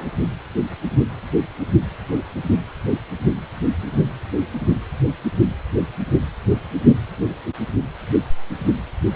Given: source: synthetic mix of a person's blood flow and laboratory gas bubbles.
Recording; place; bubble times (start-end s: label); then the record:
Doppler ultrasound of blood flow; precordium
0.00-0.11 s: bubbles
From the record:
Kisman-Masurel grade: 111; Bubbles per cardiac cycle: 1 to 2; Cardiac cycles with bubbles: 1 to 10%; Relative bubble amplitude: barely perceptible (0.100 to 0.250); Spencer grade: 1 (occasional bubble signal discernible with the cardiac motion signal, with majority of cardiac periods free of bubbles); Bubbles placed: anywhere in the cardiac cycle